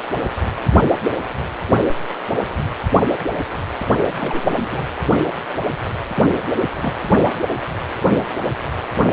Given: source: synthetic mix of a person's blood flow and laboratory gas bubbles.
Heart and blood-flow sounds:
Doppler ultrasound of blood flow; precordium
4.19-4.88 s: bubbles
6.16-6.24 s: bubbles
6.77-6.94 s: bubbles
From the record:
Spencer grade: 2 (many but less than half of the cardiac periods contain bubble signals, singularly or in groups); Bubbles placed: only in the low amplitude regions of the cardiac cycle

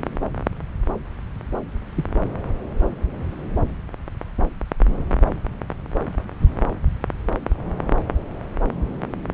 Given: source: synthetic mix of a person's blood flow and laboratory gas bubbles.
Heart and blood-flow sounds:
Doppler ultrasound of blood flow; subclavian vein
1.95-2.04 s: bubbles
From the record:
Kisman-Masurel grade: 112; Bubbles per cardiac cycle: 1 to 2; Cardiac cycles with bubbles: 1 to 10%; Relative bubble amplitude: moderate (0.250 to 0.450); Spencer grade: 1 (occasional bubble signal discernible with the cardiac motion signal, with majority of cardiac periods free of bubbles); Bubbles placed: anywhere in the cardiac cycle

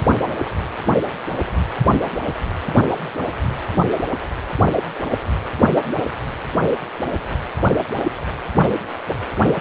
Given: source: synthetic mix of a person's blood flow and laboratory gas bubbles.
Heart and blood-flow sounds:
Doppler ultrasound of blood flow; precordium
no bubbles
From the record:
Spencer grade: 0 (complete lack of bubble signals)

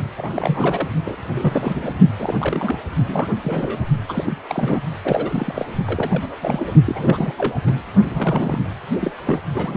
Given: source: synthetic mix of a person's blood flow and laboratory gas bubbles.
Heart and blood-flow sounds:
Doppler ultrasound of blood flow; precordium
0.17-0.89 s: bubbles
1.05-1.16 s: bubbles
1.31-1.93 s: bubbles
2.19-2.34 s: bubbles
2.38-2.77 s: bubbles
3.07-3.35 s: bubbles
3.44-3.80 s: bubbles
4.08-4.37 s: bubbles
4.47-4.80 s: bubbles
5.04-5.66 s: bubbles
5.87-6.28 s: bubbles
6.42-6.72 s: bubbles
6.86-7.31 s: bubbles
7.38-7.59 s: bubbles
7.67-7.71 s: bubbles
8.07-8.63 s: bubbles
9.00-9.12 s: bubbles
9.24-9.39 s: bubbles
9.54-9.77 s: bubbles
From the record:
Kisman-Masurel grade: 342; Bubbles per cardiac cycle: rolling drumbeat, 9 or more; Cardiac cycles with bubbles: 100%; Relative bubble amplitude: moderate (0.250 to 0.450); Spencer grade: 3 (all of the cardiac periods contain showers or single bubble signals, but not dominating or overriding the cardiac motion signals); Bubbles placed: only in the low amplitude regions of the cardiac cycle

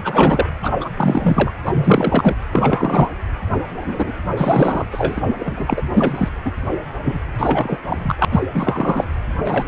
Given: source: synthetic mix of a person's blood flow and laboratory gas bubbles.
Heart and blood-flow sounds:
Doppler ultrasound of blood flow; precordium
0.03-0.49 s: bubbles
0.62-0.77 s: bubbles
0.80-0.91 s: bubbles
0.97-1.52 s: bubbles
1.65-2.35 s: bubbles
2.53-3.10 s: bubbles
3.84-4.12 s: bubbles
4.36-4.85 s: bubbles
4.91-5.21 s: bubbles
5.39-5.83 s: bubbles
5.94-6.29 s: bubbles
6.45-6.51 s: bubbles
7.02-7.19 s: bubbles
7.38-7.78 s: bubbles
7.87-8.16 s: bubbles
8.19-8.25 s: bubbles
8.30-8.41 s: bubbles
8.54-9.08 s: bubbles
9.44-9.66 s: bubbles
From the record:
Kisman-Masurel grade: 343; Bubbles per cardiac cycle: rolling drumbeat, 9 or more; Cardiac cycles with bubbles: 100%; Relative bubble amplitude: loud (0.450 to 0.775); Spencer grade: 3 (all of the cardiac periods contain showers or single bubble signals, but not dominating or overriding the cardiac motion signals); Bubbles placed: anywhere in the cardiac cycle

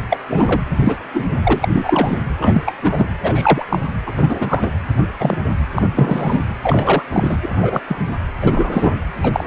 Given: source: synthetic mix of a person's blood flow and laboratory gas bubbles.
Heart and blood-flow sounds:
Doppler ultrasound of blood flow; precordium
0.00-0.02 s: bubbles
0.10-0.19 s: bubbles
0.28-0.61 s: bubbles
0.84-0.99 s: bubbles
1.13-1.26 s: bubbles
1.43-1.68 s: bubbles
1.72-2.17 s: bubbles
2.39-2.62 s: bubbles
2.65-2.74 s: bubbles
2.82-3.06 s: bubbles
3.22-3.65 s: bubbles
3.69-3.79 s: bubbles
4.06-4.71 s: bubbles
5.19-5.38 s: bubbles
5.75-5.83 s: bubbles
5.96-6.43 s: bubbles
6.63-7.03 s: bubbles
7.12-7.37 s: bubbles
7.42-7.82 s: bubbles
7.87-7.96 s: bubbles
8.42-9.07 s: bubbles
9.23-9.44 s: bubbles
From the record:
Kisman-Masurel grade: 233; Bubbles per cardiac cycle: several, 3 to 8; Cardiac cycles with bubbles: 50 to 99%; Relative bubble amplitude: loud (0.450 to 0.775); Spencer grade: 3 (all of the cardiac periods contain showers or single bubble signals, but not dominating or overriding the cardiac motion signals); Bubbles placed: anywhere in the cardiac cycle

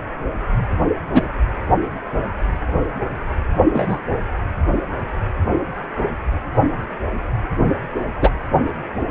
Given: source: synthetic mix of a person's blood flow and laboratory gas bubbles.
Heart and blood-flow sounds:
Doppler ultrasound of blood flow; precordium
1.12-1.28 s: bubbles
3.72-3.98 s: bubbles
8.21-8.30 s: bubbles
From the record:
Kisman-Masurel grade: 123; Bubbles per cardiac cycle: 1 to 2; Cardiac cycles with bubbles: 10 to 50%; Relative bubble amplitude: loud (0.450 to 0.775); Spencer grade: 2 (many but less than half of the cardiac periods contain bubble signals, singularly or in groups); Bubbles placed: anywhere in the cardiac cycle

